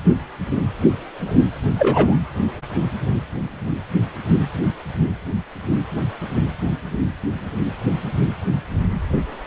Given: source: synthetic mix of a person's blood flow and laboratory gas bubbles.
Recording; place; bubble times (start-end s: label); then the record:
Doppler ultrasound of blood flow; precordium
1.78-2.16 s: bubbles
From the record:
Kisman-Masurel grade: 113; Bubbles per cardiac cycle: 1 to 2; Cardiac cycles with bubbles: 1 to 10%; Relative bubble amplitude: loud (0.450 to 0.775); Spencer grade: 1 (occasional bubble signal discernible with the cardiac motion signal, with majority of cardiac periods free of bubbles); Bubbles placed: only in the low amplitude regions of the cardiac cycle